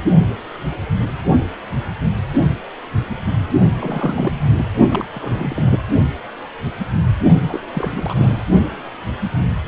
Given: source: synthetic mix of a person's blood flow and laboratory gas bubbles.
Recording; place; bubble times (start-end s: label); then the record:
Doppler ultrasound of blood flow; precordium
3.79-4.33 s: bubbles
4.58-4.67 s: bubbles
4.88-5.05 s: bubbles
5.13-5.78 s: bubbles
7.48-7.61 s: bubbles
7.74-8.44 s: bubbles
From the record:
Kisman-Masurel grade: 332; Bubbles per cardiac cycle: rolling drumbeat, 9 or more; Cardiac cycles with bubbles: 50 to 99%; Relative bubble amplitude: moderate (0.250 to 0.450); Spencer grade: 3 (all of the cardiac periods contain showers or single bubble signals, but not dominating or overriding the cardiac motion signals); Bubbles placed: only in the low amplitude regions of the cardiac cycle